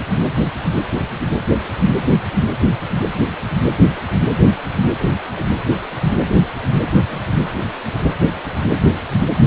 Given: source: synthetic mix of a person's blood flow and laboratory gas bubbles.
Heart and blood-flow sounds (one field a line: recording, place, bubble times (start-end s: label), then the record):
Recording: Doppler ultrasound of blood flow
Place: precordium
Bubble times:
5.00-5.09 s: bubbles
5.37-5.41 s: bubbles
6.92-7.26 s: bubbles
From the record:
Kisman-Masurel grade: 111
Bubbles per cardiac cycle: 1 to 2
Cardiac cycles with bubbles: 1 to 10%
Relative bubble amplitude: barely perceptible (0.100 to 0.250)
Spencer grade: 1 (occasional bubble signal discernible with the cardiac motion signal, with majority of cardiac periods free of bubbles)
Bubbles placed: anywhere in the cardiac cycle